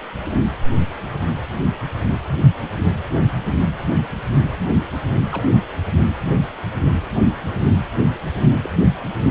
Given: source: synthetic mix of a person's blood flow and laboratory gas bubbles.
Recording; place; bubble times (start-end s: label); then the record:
Doppler ultrasound of blood flow; precordium
5.31-5.47 s: bubbles
8.64-8.70 s: bubbles
From the record:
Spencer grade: 2 (many but less than half of the cardiac periods contain bubble signals, singularly or in groups); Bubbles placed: anywhere in the cardiac cycle